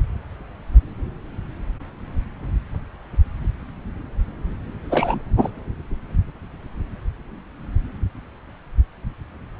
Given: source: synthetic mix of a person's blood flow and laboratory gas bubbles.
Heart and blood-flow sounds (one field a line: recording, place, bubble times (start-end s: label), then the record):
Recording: Doppler ultrasound of blood flow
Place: subclavian vein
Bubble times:
4.90-5.20 s: bubbles
5.38-5.50 s: bubbles
From the record:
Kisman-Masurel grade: 212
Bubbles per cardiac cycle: several, 3 to 8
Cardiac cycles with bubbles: 1 to 10%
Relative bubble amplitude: moderate (0.250 to 0.450)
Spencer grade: 1 (occasional bubble signal discernible with the cardiac motion signal, with majority of cardiac periods free of bubbles)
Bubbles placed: anywhere in the cardiac cycle